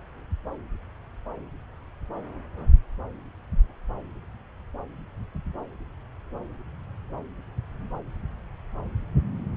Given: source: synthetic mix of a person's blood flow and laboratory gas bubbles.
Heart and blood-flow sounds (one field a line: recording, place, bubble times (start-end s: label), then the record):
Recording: Doppler ultrasound of blood flow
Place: subclavian vein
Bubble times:
no bubbles
From the record:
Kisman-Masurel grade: 000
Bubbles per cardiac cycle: 0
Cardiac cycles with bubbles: 0%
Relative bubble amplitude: no bubbles discernible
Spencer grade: 0 (complete lack of bubble signals)